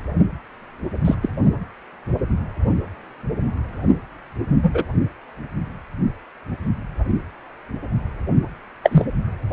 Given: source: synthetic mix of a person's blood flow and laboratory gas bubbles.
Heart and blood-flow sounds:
Doppler ultrasound of blood flow; precordium
1.04-1.15 s: bubbles
1.22-1.29 s: bubbles
4.62-4.71 s: bubbles
4.73-4.84 s: bubbles
8.83-9.05 s: bubbles
From the record:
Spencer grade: 2 (many but less than half of the cardiac periods contain bubble signals, singularly or in groups); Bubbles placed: only in the low amplitude regions of the cardiac cycle

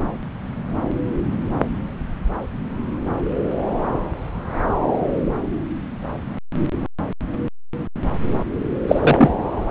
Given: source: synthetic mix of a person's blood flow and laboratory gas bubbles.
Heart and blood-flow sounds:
Doppler ultrasound of blood flow; subclavian vein
8.88-9.31 s: bubbles
From the record:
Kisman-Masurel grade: 213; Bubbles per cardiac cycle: several, 3 to 8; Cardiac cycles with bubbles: 1 to 10%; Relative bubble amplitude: loud (0.450 to 0.775); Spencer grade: 1 (occasional bubble signal discernible with the cardiac motion signal, with majority of cardiac periods free of bubbles); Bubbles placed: anywhere in the cardiac cycle

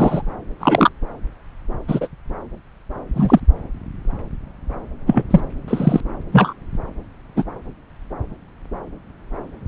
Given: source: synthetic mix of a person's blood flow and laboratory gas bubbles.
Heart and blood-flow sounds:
Doppler ultrasound of blood flow; subclavian vein
0.00-0.22 s: bubbles
0.60-0.89 s: bubbles
1.88-2.08 s: bubbles
3.16-3.40 s: bubbles
5.07-5.23 s: bubbles
5.30-5.41 s: bubbles
5.67-6.00 s: bubbles
6.32-6.53 s: bubbles
7.36-7.45 s: bubbles
From the record:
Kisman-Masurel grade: 123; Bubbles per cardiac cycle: 1 to 2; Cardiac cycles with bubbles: 10 to 50%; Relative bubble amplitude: loud (0.450 to 0.775); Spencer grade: 2 (many but less than half of the cardiac periods contain bubble signals, singularly or in groups); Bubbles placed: anywhere in the cardiac cycle

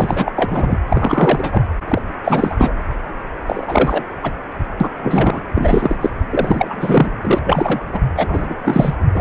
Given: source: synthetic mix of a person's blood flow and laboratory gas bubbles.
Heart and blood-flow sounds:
Doppler ultrasound of blood flow; precordium
0.00-0.33 s: bubbles
0.36-0.82 s: bubbles
0.89-1.63 s: bubbles
1.88-2.02 s: bubbles
2.24-2.73 s: bubbles
3.47-4.04 s: bubbles
4.23-4.31 s: bubbles
4.80-4.88 s: bubbles
5.03-5.41 s: bubbles
5.54-5.96 s: bubbles
6.01-6.10 s: bubbles
6.29-7.10 s: bubbles
7.21-7.41 s: bubbles
7.45-7.80 s: bubbles
7.92-8.01 s: bubbles
8.17-8.55 s: bubbles
8.62-8.96 s: bubbles
9.13-9.21 s: bubbles
From the record:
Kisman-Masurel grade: 343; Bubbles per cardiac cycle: rolling drumbeat, 9 or more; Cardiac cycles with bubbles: 100%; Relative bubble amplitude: loud (0.450 to 0.775); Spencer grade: 3 (all of the cardiac periods contain showers or single bubble signals, but not dominating or overriding the cardiac motion signals); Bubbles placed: anywhere in the cardiac cycle

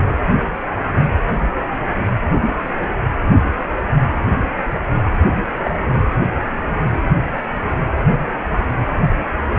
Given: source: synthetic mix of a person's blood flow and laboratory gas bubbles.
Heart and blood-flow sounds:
Doppler ultrasound of blood flow; precordium
5.63-5.71 s: bubbles
From the record:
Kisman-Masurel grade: 112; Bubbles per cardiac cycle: 1 to 2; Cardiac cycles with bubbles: 1 to 10%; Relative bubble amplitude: moderate (0.250 to 0.450); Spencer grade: 1 (occasional bubble signal discernible with the cardiac motion signal, with majority of cardiac periods free of bubbles); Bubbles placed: anywhere in the cardiac cycle

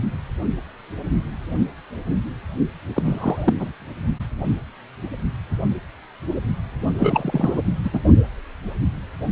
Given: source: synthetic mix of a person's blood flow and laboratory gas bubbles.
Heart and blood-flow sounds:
Doppler ultrasound of blood flow; precordium
2.94-3.53 s: bubbles
3.58-3.72 s: bubbles
6.98-7.62 s: bubbles
7.83-8.00 s: bubbles
From the record:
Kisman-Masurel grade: 222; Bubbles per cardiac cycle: several, 3 to 8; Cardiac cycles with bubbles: 10 to 50%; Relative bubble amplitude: moderate (0.250 to 0.450); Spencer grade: 2 (many but less than half of the cardiac periods contain bubble signals, singularly or in groups); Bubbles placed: only in the low amplitude regions of the cardiac cycle

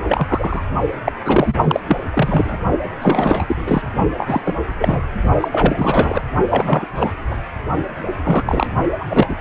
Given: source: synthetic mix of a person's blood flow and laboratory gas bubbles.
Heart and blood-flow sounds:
Doppler ultrasound of blood flow; precordium
0.07-0.64 s: bubbles
1.05-1.12 s: bubbles
1.24-1.56 s: bubbles
1.63-1.80 s: bubbles
1.87-1.99 s: bubbles
2.14-2.58 s: bubbles
3.00-3.92 s: bubbles
4.17-4.41 s: bubbles
4.45-4.54 s: bubbles
4.79-5.01 s: bubbles
5.40-5.48 s: bubbles
5.51-6.23 s: bubbles
6.50-6.87 s: bubbles
6.95-7.12 s: bubbles
7.31-7.38 s: bubbles
8.23-8.71 s: bubbles
9.00-9.05 s: bubbles
9.09-9.35 s: bubbles
9.38-9.41 s: bubbles
From the record:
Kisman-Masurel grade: 343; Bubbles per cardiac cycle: rolling drumbeat, 9 or more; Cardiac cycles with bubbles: 100%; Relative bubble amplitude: loud (0.450 to 0.775); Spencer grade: 3 (all of the cardiac periods contain showers or single bubble signals, but not dominating or overriding the cardiac motion signals); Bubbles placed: only in the low amplitude regions of the cardiac cycle

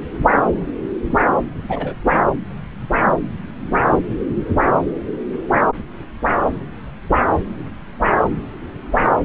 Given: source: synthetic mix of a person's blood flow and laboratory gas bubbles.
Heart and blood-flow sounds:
Doppler ultrasound of blood flow; subclavian vein
1.69-1.95 s: bubbles
From the record:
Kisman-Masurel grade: 112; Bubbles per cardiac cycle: 1 to 2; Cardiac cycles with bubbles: 1 to 10%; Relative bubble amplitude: moderate (0.250 to 0.450); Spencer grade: 1 (occasional bubble signal discernible with the cardiac motion signal, with majority of cardiac periods free of bubbles); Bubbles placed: anywhere in the cardiac cycle

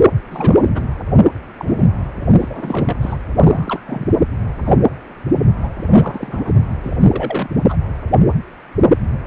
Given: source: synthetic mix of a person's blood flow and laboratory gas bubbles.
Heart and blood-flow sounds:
Doppler ultrasound of blood flow; precordium
0.31-0.87 s: bubbles
1.59-1.90 s: bubbles
2.40-3.17 s: bubbles
3.36-3.82 s: bubbles
3.86-4.08 s: bubbles
4.66-4.79 s: bubbles
5.63-5.69 s: bubbles
5.80-6.52 s: bubbles
6.83-7.48 s: bubbles
7.68-7.77 s: bubbles
From the record:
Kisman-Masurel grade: 232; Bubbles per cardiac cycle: several, 3 to 8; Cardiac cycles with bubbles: 50 to 99%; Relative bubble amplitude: moderate (0.250 to 0.450); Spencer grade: 3 (all of the cardiac periods contain showers or single bubble signals, but not dominating or overriding the cardiac motion signals); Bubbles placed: anywhere in the cardiac cycle

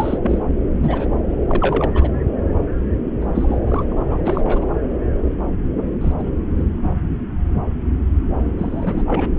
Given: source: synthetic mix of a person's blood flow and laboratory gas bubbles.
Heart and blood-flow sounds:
Doppler ultrasound of blood flow; subclavian vein
0.00-0.18 s: bubbles
0.22-0.39 s: bubbles
0.78-1.08 s: bubbles
1.29-1.35 s: bubbles
1.48-1.90 s: bubbles
1.94-2.09 s: bubbles
3.21-3.26 s: bubbles
3.34-3.57 s: bubbles
3.67-3.84 s: bubbles
3.91-4.20 s: bubbles
4.22-4.65 s: bubbles
6.01-6.12 s: bubbles
6.18-6.33 s: bubbles
6.58-6.64 s: bubbles
6.76-6.94 s: bubbles
8.59-9.03 s: bubbles
9.06-9.31 s: bubbles
From the record:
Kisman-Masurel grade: 232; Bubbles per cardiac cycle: several, 3 to 8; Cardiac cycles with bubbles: 50 to 99%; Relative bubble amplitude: moderate (0.250 to 0.450); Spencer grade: 3 (all of the cardiac periods contain showers or single bubble signals, but not dominating or overriding the cardiac motion signals); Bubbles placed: anywhere in the cardiac cycle

